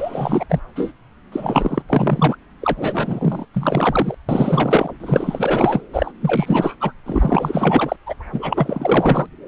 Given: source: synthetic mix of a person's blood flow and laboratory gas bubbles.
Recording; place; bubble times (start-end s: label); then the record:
Doppler ultrasound of blood flow; subclavian vein
0.00-0.46 s: bubbles
0.49-0.60 s: bubbles
0.75-0.94 s: bubbles
1.32-1.82 s: bubbles
1.89-2.35 s: bubbles
2.61-2.73 s: bubbles
2.76-3.45 s: bubbles
3.53-4.14 s: bubbles
4.29-4.92 s: bubbles
5.00-5.81 s: bubbles
5.93-6.12 s: bubbles
6.21-6.75 s: bubbles
6.80-6.92 s: bubbles
7.05-7.96 s: bubbles
8.06-8.15 s: bubbles
8.32-9.27 s: bubbles
From the record:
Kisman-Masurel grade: 444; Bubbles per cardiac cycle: continuous sound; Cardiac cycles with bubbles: 100%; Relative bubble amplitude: maximal (0.775 to 0.999); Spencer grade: 4 (maximum detectable bubble signal sounding continuously throughout systole and diastole of every cardiac period, and overriding the amplitude of the normal cardiac signals); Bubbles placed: anywhere in the cardiac cycle